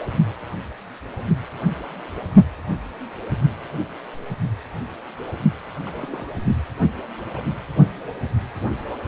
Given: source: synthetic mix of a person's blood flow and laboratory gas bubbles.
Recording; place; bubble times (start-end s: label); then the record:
Doppler ultrasound of blood flow; precordium
5.85-6.29 s: bubbles
7.21-7.29 s: bubbles
7.33-7.43 s: bubbles
From the record:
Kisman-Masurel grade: 121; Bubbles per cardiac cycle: 1 to 2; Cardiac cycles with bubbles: 10 to 50%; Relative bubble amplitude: barely perceptible (0.100 to 0.250); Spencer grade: 2 (many but less than half of the cardiac periods contain bubble signals, singularly or in groups); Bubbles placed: only in the low amplitude regions of the cardiac cycle